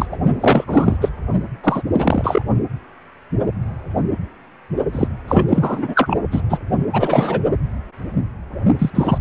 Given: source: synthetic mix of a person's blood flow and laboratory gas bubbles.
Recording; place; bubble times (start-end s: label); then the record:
Doppler ultrasound of blood flow; precordium
0.00-0.06 s: bubbles
0.11-0.16 s: bubbles
0.40-0.64 s: bubbles
0.67-0.97 s: bubbles
1.01-1.09 s: bubbles
1.64-1.83 s: bubbles
1.93-2.42 s: bubbles
4.92-5.07 s: bubbles
5.27-6.17 s: bubbles
6.31-6.42 s: bubbles
6.49-6.58 s: bubbles
6.93-7.40 s: bubbles
8.78-8.90 s: bubbles
8.95-9.18 s: bubbles
From the record:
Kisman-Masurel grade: 333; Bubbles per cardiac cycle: rolling drumbeat, 9 or more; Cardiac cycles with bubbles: 50 to 99%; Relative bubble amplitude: loud (0.450 to 0.775); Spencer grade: 3 (all of the cardiac periods contain showers or single bubble signals, but not dominating or overriding the cardiac motion signals); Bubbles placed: only in the low amplitude regions of the cardiac cycle